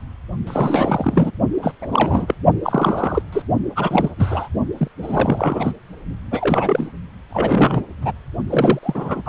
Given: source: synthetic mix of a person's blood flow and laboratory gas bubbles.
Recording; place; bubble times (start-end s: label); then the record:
Doppler ultrasound of blood flow; precordium
0.47-1.31 s: bubbles
1.61-1.72 s: bubbles
1.81-2.34 s: bubbles
2.63-3.22 s: bubbles
3.32-3.42 s: bubbles
3.75-4.11 s: bubbles
4.17-4.48 s: bubbles
4.78-4.88 s: bubbles
5.02-5.71 s: bubbles
6.31-6.89 s: bubbles
7.30-7.83 s: bubbles
8.02-8.12 s: bubbles
8.50-8.79 s: bubbles
8.83-9.21 s: bubbles
9.23-9.29 s: bubbles
From the record:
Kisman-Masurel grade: 332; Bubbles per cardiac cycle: rolling drumbeat, 9 or more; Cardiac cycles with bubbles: 50 to 99%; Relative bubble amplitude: moderate (0.250 to 0.450); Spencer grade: 3 (all of the cardiac periods contain showers or single bubble signals, but not dominating or overriding the cardiac motion signals); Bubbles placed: only in the low amplitude regions of the cardiac cycle